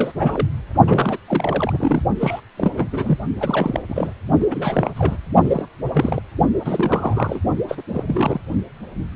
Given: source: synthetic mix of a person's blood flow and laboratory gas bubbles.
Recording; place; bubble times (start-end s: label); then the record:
Doppler ultrasound of blood flow; precordium
0.00-0.12 s: bubbles
0.15-0.49 s: bubbles
0.85-1.18 s: bubbles
1.27-2.02 s: bubbles
2.19-2.41 s: bubbles
2.58-2.71 s: bubbles
2.77-2.88 s: bubbles
2.92-3.19 s: bubbles
3.40-3.82 s: bubbles
3.88-4.13 s: bubbles
4.40-4.46 s: bubbles
4.50-4.91 s: bubbles
4.96-5.17 s: bubbles
5.43-5.67 s: bubbles
5.90-6.21 s: bubbles
6.65-7.39 s: bubbles
7.68-7.82 s: bubbles
7.94-8.04 s: bubbles
8.07-8.40 s: bubbles
From the record:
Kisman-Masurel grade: 332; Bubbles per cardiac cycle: rolling drumbeat, 9 or more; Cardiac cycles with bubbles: 50 to 99%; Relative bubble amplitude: moderate (0.250 to 0.450); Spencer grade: 3 (all of the cardiac periods contain showers or single bubble signals, but not dominating or overriding the cardiac motion signals); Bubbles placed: only in the low amplitude regions of the cardiac cycle